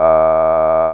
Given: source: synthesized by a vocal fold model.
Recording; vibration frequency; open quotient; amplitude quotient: sustained vowel; 80 Hz; 0.1; 1